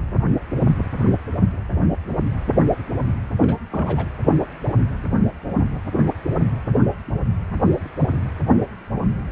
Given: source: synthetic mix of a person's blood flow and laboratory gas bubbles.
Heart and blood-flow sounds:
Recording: Doppler ultrasound of blood flow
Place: precordium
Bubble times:
3.40-3.57 s: bubbles
3.70-4.09 s: bubbles
From the record:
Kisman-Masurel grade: 211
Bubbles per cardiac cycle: several, 3 to 8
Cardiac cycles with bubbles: 1 to 10%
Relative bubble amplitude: barely perceptible (0.100 to 0.250)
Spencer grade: 1 (occasional bubble signal discernible with the cardiac motion signal, with majority of cardiac periods free of bubbles)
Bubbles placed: anywhere in the cardiac cycle

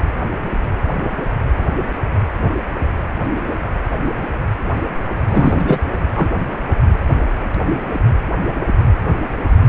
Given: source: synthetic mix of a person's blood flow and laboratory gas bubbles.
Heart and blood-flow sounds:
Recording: Doppler ultrasound of blood flow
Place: precordium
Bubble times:
5.30-5.79 s: bubbles
6.15-6.28 s: bubbles
From the record:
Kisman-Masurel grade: 213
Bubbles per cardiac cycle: several, 3 to 8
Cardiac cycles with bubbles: 1 to 10%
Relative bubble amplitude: loud (0.450 to 0.775)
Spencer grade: 1 (occasional bubble signal discernible with the cardiac motion signal, with majority of cardiac periods free of bubbles)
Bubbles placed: anywhere in the cardiac cycle

